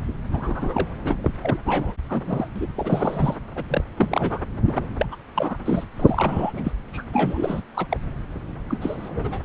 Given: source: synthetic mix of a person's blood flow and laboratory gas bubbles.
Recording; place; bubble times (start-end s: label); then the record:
Doppler ultrasound of blood flow; subclavian vein
0.32-0.88 s: bubbles
1.04-1.35 s: bubbles
1.41-1.59 s: bubbles
1.65-1.95 s: bubbles
2.09-2.48 s: bubbles
2.56-2.66 s: bubbles
2.76-3.36 s: bubbles
3.55-3.64 s: bubbles
3.68-3.84 s: bubbles
3.97-4.40 s: bubbles
4.66-4.85 s: bubbles
4.98-5.06 s: bubbles
5.11-5.16 s: bubbles
5.35-5.56 s: bubbles
5.65-5.84 s: bubbles
6.00-6.72 s: bubbles
6.93-7.04 s: bubbles
7.12-7.61 s: bubbles
7.73-7.86 s: bubbles
7.89-7.97 s: bubbles
8.69-8.78 s: bubbles
8.80-9.40 s: bubbles
From the record:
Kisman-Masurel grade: 342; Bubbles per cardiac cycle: rolling drumbeat, 9 or more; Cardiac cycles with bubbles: 100%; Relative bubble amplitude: moderate (0.250 to 0.450); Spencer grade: 3 (all of the cardiac periods contain showers or single bubble signals, but not dominating or overriding the cardiac motion signals); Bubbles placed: anywhere in the cardiac cycle